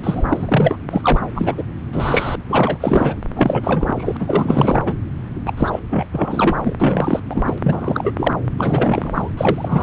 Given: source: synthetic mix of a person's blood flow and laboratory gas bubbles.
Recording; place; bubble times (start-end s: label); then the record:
Doppler ultrasound of blood flow; subclavian vein
0.03-0.23 s: bubbles
0.29-0.77 s: bubbles
0.91-1.21 s: bubbles
1.34-1.64 s: bubbles
1.92-2.35 s: bubbles
2.47-3.17 s: bubbles
3.35-4.83 s: bubbles
4.85-4.95 s: bubbles
5.46-5.53 s: bubbles
5.57-5.79 s: bubbles
5.89-6.05 s: bubbles
6.11-6.75 s: bubbles
6.79-7.20 s: bubbles
7.30-7.58 s: bubbles
7.63-8.13 s: bubbles
8.17-8.34 s: bubbles
8.58-9.31 s: bubbles
9.37-9.83 s: bubbles
From the record:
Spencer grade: 3 (all of the cardiac periods contain showers or single bubble signals, but not dominating or overriding the cardiac motion signals); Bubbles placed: anywhere in the cardiac cycle